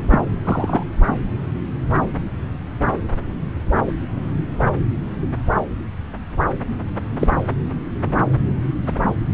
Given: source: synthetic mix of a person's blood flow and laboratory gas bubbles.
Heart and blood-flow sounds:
Doppler ultrasound of blood flow; subclavian vein
0.11-0.20 s: bubbles
0.44-0.83 s: bubbles
3.87-3.92 s: bubbles
7.20-7.28 s: bubbles
From the record:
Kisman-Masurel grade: 123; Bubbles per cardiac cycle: 1 to 2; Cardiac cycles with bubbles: 10 to 50%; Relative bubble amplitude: loud (0.450 to 0.775); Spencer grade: 2 (many but less than half of the cardiac periods contain bubble signals, singularly or in groups); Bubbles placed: anywhere in the cardiac cycle

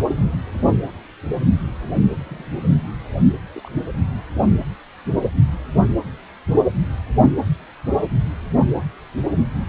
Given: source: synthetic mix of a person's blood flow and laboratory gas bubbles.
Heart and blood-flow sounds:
Doppler ultrasound of blood flow; precordium
2.17-2.49 s: bubbles
3.54-3.70 s: bubbles
From the record:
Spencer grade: 1 (occasional bubble signal discernible with the cardiac motion signal, with majority of cardiac periods free of bubbles); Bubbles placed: anywhere in the cardiac cycle

